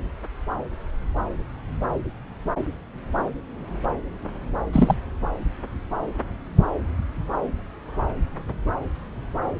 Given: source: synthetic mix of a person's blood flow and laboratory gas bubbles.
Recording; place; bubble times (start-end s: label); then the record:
Doppler ultrasound of blood flow; subclavian vein
4.72-4.96 s: bubbles
From the record:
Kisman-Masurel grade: 212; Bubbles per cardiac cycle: several, 3 to 8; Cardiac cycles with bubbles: 1 to 10%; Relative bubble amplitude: moderate (0.250 to 0.450); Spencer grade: 1 (occasional bubble signal discernible with the cardiac motion signal, with majority of cardiac periods free of bubbles); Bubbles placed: anywhere in the cardiac cycle